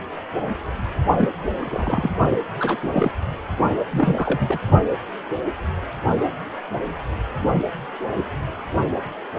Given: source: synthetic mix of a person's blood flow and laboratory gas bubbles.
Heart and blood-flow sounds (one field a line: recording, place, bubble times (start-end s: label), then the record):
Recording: Doppler ultrasound of blood flow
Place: precordium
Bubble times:
1.17-1.29 s: bubbles
1.59-2.11 s: bubbles
2.59-2.77 s: bubbles
2.83-3.11 s: bubbles
3.91-4.58 s: bubbles
From the record:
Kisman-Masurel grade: 232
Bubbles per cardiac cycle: several, 3 to 8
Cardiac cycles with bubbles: 50 to 99%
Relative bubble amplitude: moderate (0.250 to 0.450)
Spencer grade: 3 (all of the cardiac periods contain showers or single bubble signals, but not dominating or overriding the cardiac motion signals)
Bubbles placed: only in the low amplitude regions of the cardiac cycle